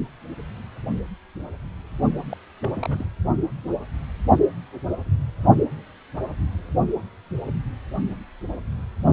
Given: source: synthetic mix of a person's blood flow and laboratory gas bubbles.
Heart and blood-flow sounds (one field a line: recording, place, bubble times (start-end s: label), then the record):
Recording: Doppler ultrasound of blood flow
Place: precordium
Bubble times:
2.29-2.37 s: bubbles
2.61-2.70 s: bubbles
2.74-3.05 s: bubbles
From the record:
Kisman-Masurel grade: 211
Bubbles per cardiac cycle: several, 3 to 8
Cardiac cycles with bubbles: 1 to 10%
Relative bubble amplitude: barely perceptible (0.100 to 0.250)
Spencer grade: 1 (occasional bubble signal discernible with the cardiac motion signal, with majority of cardiac periods free of bubbles)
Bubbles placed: only in the low amplitude regions of the cardiac cycle